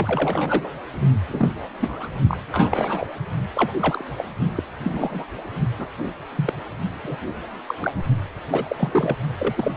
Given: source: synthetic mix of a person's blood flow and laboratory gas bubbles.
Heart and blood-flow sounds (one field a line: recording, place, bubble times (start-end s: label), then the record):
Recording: Doppler ultrasound of blood flow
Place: precordium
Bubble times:
0.00-0.69 s: bubbles
1.29-1.49 s: bubbles
1.80-2.09 s: bubbles
2.27-2.37 s: bubbles
2.52-3.07 s: bubbles
3.55-3.73 s: bubbles
3.79-4.04 s: bubbles
4.17-4.25 s: bubbles
4.55-4.63 s: bubbles
4.83-5.25 s: bubbles
5.79-5.85 s: bubbles
6.35-6.53 s: bubbles
7.03-7.17 s: bubbles
7.68-7.74 s: bubbles
7.81-7.91 s: bubbles
8.51-9.16 s: bubbles
9.37-9.71 s: bubbles
From the record:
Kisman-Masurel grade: 242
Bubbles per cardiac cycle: several, 3 to 8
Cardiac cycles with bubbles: 100%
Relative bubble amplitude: moderate (0.250 to 0.450)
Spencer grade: 3 (all of the cardiac periods contain showers or single bubble signals, but not dominating or overriding the cardiac motion signals)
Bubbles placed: only in the low amplitude regions of the cardiac cycle